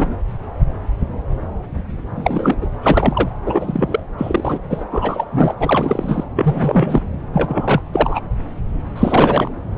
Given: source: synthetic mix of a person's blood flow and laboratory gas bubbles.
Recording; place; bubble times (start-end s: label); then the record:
Doppler ultrasound of blood flow; subclavian vein
0.00-0.16 s: bubbles
2.15-2.56 s: bubbles
2.61-2.66 s: bubbles
2.81-3.29 s: bubbles
3.45-4.00 s: bubbles
4.17-4.58 s: bubbles
4.70-4.84 s: bubbles
4.91-5.25 s: bubbles
5.31-5.54 s: bubbles
5.59-6.24 s: bubbles
6.35-7.01 s: bubbles
7.33-7.81 s: bubbles
7.92-8.21 s: bubbles
8.96-9.50 s: bubbles
From the record:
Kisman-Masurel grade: 333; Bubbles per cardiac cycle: rolling drumbeat, 9 or more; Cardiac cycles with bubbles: 50 to 99%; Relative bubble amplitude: loud (0.450 to 0.775); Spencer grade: 3 (all of the cardiac periods contain showers or single bubble signals, but not dominating or overriding the cardiac motion signals); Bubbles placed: anywhere in the cardiac cycle